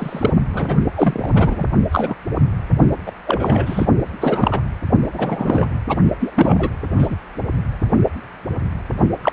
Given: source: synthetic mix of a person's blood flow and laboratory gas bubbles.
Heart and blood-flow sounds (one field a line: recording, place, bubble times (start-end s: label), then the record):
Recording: Doppler ultrasound of blood flow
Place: precordium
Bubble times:
0.00-0.31 s: bubbles
0.53-0.77 s: bubbles
0.95-1.65 s: bubbles
1.91-2.15 s: bubbles
3.06-3.11 s: bubbles
3.26-3.86 s: bubbles
4.20-4.62 s: bubbles
5.14-5.66 s: bubbles
5.89-5.97 s: bubbles
6.21-6.31 s: bubbles
6.35-6.71 s: bubbles
6.99-7.16 s: bubbles
9.22-9.32 s: bubbles
From the record:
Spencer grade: 3 (all of the cardiac periods contain showers or single bubble signals, but not dominating or overriding the cardiac motion signals)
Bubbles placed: only in the low amplitude regions of the cardiac cycle